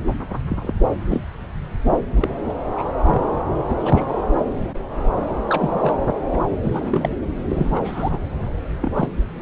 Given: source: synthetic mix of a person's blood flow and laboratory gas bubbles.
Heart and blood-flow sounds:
Doppler ultrasound of blood flow; subclavian vein
0.49-0.73 s: bubbles
1.06-1.23 s: bubbles
2.16-2.30 s: bubbles
2.49-2.54 s: bubbles
2.77-2.85 s: bubbles
3.01-3.43 s: bubbles
3.70-3.75 s: bubbles
3.79-4.25 s: bubbles
5.50-5.95 s: bubbles
6.31-6.38 s: bubbles
6.62-7.17 s: bubbles
7.46-8.18 s: bubbles
8.81-8.92 s: bubbles
8.96-9.08 s: bubbles
From the record:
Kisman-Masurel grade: 232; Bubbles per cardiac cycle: several, 3 to 8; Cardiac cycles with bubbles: 50 to 99%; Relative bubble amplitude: moderate (0.250 to 0.450); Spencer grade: 3 (all of the cardiac periods contain showers or single bubble signals, but not dominating or overriding the cardiac motion signals); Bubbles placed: anywhere in the cardiac cycle

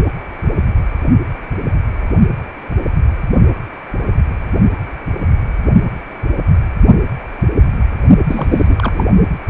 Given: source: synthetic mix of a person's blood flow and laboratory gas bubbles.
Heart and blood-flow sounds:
Doppler ultrasound of blood flow; precordium
8.28-9.04 s: bubbles
From the record:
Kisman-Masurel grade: 212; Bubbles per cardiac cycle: several, 3 to 8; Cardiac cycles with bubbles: 1 to 10%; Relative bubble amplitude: moderate (0.250 to 0.450); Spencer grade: 1 (occasional bubble signal discernible with the cardiac motion signal, with majority of cardiac periods free of bubbles); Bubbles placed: only in the low amplitude regions of the cardiac cycle

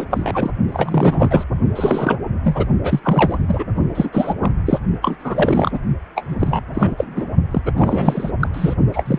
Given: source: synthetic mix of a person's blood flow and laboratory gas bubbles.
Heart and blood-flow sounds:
Doppler ultrasound of blood flow; precordium
0.00-0.05 s: bubbles
0.10-0.51 s: bubbles
0.71-1.44 s: bubbles
1.75-2.20 s: bubbles
2.44-2.66 s: bubbles
2.83-3.00 s: bubbles
3.04-3.38 s: bubbles
3.48-3.66 s: bubbles
3.95-4.09 s: bubbles
4.12-4.34 s: bubbles
4.41-4.51 s: bubbles
4.66-4.79 s: bubbles
5.01-5.79 s: bubbles
6.15-6.25 s: bubbles
6.29-6.36 s: bubbles
6.40-6.62 s: bubbles
6.74-7.28 s: bubbles
7.51-7.62 s: bubbles
7.66-7.72 s: bubbles
7.77-8.30 s: bubbles
8.39-8.49 s: bubbles
8.53-8.74 s: bubbles
8.92-9.19 s: bubbles
From the record:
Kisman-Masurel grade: 343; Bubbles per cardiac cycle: rolling drumbeat, 9 or more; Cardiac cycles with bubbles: 100%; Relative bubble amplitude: loud (0.450 to 0.775); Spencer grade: 3 (all of the cardiac periods contain showers or single bubble signals, but not dominating or overriding the cardiac motion signals); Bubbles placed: only in the low amplitude regions of the cardiac cycle

